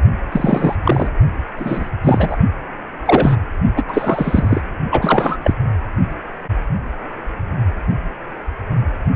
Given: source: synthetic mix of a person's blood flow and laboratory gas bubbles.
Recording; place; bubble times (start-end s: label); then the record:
Doppler ultrasound of blood flow; precordium
0.32-0.76 s: bubbles
0.83-1.09 s: bubbles
1.58-1.90 s: bubbles
2.04-2.37 s: bubbles
3.05-3.36 s: bubbles
3.76-3.84 s: bubbles
3.88-4.61 s: bubbles
4.91-5.37 s: bubbles
5.43-5.54 s: bubbles
From the record:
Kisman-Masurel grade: 233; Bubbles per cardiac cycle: several, 3 to 8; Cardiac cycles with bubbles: 50 to 99%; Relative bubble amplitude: loud (0.450 to 0.775); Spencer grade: 3 (all of the cardiac periods contain showers or single bubble signals, but not dominating or overriding the cardiac motion signals); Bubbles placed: only in the low amplitude regions of the cardiac cycle